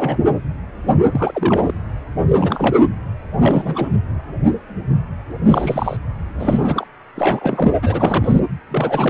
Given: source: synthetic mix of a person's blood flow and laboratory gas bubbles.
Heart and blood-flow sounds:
Doppler ultrasound of blood flow; precordium
0.00-0.18 s: bubbles
1.11-1.75 s: bubbles
2.27-2.78 s: bubbles
3.40-3.89 s: bubbles
5.46-5.97 s: bubbles
6.39-6.87 s: bubbles
7.15-7.74 s: bubbles
7.81-8.39 s: bubbles
8.71-9.10 s: bubbles
From the record:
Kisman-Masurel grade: 332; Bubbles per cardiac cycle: rolling drumbeat, 9 or more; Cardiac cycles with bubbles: 50 to 99%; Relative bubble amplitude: moderate (0.250 to 0.450); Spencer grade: 3 (all of the cardiac periods contain showers or single bubble signals, but not dominating or overriding the cardiac motion signals); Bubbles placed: anywhere in the cardiac cycle

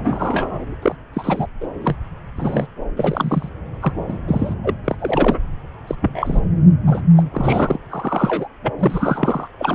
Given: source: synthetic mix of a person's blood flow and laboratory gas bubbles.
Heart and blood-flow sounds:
Doppler ultrasound of blood flow; subclavian vein
0.00-0.74 s: bubbles
0.82-0.95 s: bubbles
1.13-1.47 s: bubbles
1.61-1.67 s: bubbles
1.83-1.97 s: bubbles
2.37-2.67 s: bubbles
2.97-3.49 s: bubbles
3.80-3.92 s: bubbles
4.08-4.17 s: bubbles
4.27-4.54 s: bubbles
4.63-4.74 s: bubbles
4.84-4.96 s: bubbles
4.99-5.39 s: bubbles
5.87-5.95 s: bubbles
6.02-6.42 s: bubbles
6.86-7.01 s: bubbles
7.16-7.23 s: bubbles
7.32-7.78 s: bubbles
7.89-8.48 s: bubbles
8.62-8.73 s: bubbles
8.79-9.47 s: bubbles
9.58-9.75 s: bubbles
From the record:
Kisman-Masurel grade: 242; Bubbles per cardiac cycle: several, 3 to 8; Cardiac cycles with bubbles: 100%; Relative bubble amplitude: moderate (0.250 to 0.450); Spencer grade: 3 (all of the cardiac periods contain showers or single bubble signals, but not dominating or overriding the cardiac motion signals); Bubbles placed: anywhere in the cardiac cycle

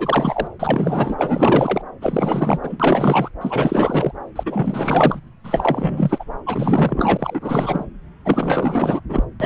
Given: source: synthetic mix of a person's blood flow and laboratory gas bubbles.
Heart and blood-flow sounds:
Doppler ultrasound of blood flow; subclavian vein
0.00-0.48 s: bubbles
0.59-1.16 s: bubbles
1.18-1.82 s: bubbles
2.01-2.58 s: bubbles
2.62-2.77 s: bubbles
2.79-3.29 s: bubbles
3.41-4.12 s: bubbles
4.36-5.20 s: bubbles
5.44-6.25 s: bubbles
6.46-7.86 s: bubbles
8.25-9.00 s: bubbles
9.09-9.24 s: bubbles
9.40-9.46 s: bubbles
From the record:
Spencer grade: 4 (maximum detectable bubble signal sounding continuously throughout systole and diastole of every cardiac period, and overriding the amplitude of the normal cardiac signals); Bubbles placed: anywhere in the cardiac cycle

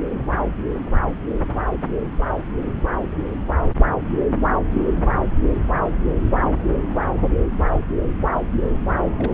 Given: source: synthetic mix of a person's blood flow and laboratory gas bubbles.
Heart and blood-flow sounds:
Doppler ultrasound of blood flow; subclavian vein
9.16-9.34 s: bubbles
From the record:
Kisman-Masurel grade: 212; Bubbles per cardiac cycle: several, 3 to 8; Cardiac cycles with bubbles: 1 to 10%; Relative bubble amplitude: moderate (0.250 to 0.450); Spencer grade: 1 (occasional bubble signal discernible with the cardiac motion signal, with majority of cardiac periods free of bubbles); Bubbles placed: anywhere in the cardiac cycle

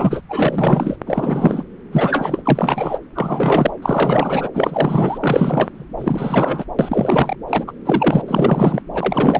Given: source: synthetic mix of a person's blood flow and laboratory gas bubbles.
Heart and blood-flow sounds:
Doppler ultrasound of blood flow; subclavian vein
0.00-0.21 s: bubbles
0.29-0.96 s: bubbles
1.06-1.64 s: bubbles
1.91-2.43 s: bubbles
2.45-3.00 s: bubbles
3.15-3.71 s: bubbles
3.82-4.49 s: bubbles
4.54-5.85 s: bubbles
5.98-6.65 s: bubbles
6.79-7.36 s: bubbles
7.48-7.64 s: bubbles
7.67-7.72 s: bubbles
7.85-8.82 s: bubbles
8.93-9.40 s: bubbles
From the record:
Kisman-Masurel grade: 343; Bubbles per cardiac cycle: rolling drumbeat, 9 or more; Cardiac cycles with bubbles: 100%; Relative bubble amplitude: loud (0.450 to 0.775); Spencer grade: 3 (all of the cardiac periods contain showers or single bubble signals, but not dominating or overriding the cardiac motion signals); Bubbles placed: anywhere in the cardiac cycle

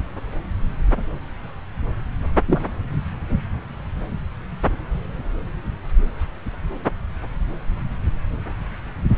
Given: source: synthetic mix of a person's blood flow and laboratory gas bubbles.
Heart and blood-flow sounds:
Doppler ultrasound of blood flow; subclavian vein
2.47-2.61 s: bubbles
From the record:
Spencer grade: 1 (occasional bubble signal discernible with the cardiac motion signal, with majority of cardiac periods free of bubbles); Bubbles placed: anywhere in the cardiac cycle

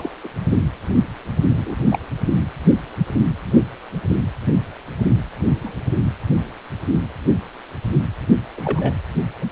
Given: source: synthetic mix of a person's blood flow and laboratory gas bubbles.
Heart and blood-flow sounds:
Doppler ultrasound of blood flow; precordium
0.00-0.12 s: bubbles
0.23-0.28 s: bubbles
1.58-1.75 s: bubbles
1.91-1.99 s: bubbles
5.63-5.75 s: bubbles
8.57-8.94 s: bubbles
From the record:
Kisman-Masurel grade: 122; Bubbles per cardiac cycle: 1 to 2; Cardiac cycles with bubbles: 10 to 50%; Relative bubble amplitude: moderate (0.250 to 0.450); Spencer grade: 2 (many but less than half of the cardiac periods contain bubble signals, singularly or in groups); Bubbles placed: anywhere in the cardiac cycle

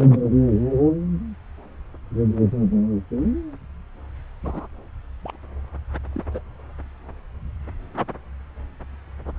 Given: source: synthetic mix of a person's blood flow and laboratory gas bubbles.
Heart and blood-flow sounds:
Doppler ultrasound of blood flow; subclavian vein
0.00-0.29 s: bubbles
4.43-4.67 s: bubbles
5.23-5.36 s: bubbles
6.12-6.23 s: bubbles
6.33-6.41 s: bubbles
From the record:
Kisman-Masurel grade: 121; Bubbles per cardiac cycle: 1 to 2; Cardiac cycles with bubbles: 10 to 50%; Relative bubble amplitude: barely perceptible (0.100 to 0.250); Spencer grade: 2 (many but less than half of the cardiac periods contain bubble signals, singularly or in groups); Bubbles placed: anywhere in the cardiac cycle

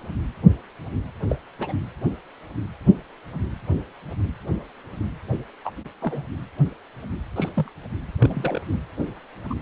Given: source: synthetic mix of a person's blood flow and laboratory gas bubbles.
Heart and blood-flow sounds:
Doppler ultrasound of blood flow; precordium
1.28-1.35 s: bubbles
1.59-1.73 s: bubbles
5.65-5.70 s: bubbles
6.02-6.24 s: bubbles
7.36-7.49 s: bubbles
7.56-7.70 s: bubbles
8.19-8.62 s: bubbles
8.70-8.78 s: bubbles
9.50-9.54 s: bubbles
From the record:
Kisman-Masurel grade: 121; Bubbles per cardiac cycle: 1 to 2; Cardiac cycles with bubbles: 10 to 50%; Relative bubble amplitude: barely perceptible (0.100 to 0.250); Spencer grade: 2 (many but less than half of the cardiac periods contain bubble signals, singularly or in groups); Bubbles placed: anywhere in the cardiac cycle

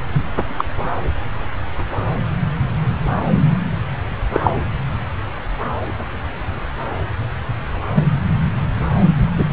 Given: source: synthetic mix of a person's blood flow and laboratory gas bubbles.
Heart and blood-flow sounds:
Doppler ultrasound of blood flow; subclavian vein
0.14-0.21 s: bubbles
0.58-0.65 s: bubbles
4.33-4.40 s: bubbles
4.43-4.50 s: bubbles
7.95-8.04 s: bubbles
9.38-9.45 s: bubbles
From the record:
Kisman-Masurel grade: 123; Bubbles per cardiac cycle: 1 to 2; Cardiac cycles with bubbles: 10 to 50%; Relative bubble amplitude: loud (0.450 to 0.775); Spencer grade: 2 (many but less than half of the cardiac periods contain bubble signals, singularly or in groups); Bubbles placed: anywhere in the cardiac cycle

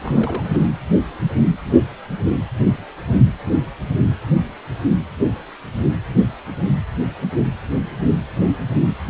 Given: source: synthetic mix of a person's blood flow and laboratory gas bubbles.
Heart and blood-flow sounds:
Doppler ultrasound of blood flow; precordium
0.00-0.58 s: bubbles
From the record:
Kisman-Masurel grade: 211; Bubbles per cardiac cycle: several, 3 to 8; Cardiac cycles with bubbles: 1 to 10%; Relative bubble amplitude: barely perceptible (0.100 to 0.250); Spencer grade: 1 (occasional bubble signal discernible with the cardiac motion signal, with majority of cardiac periods free of bubbles); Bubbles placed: anywhere in the cardiac cycle

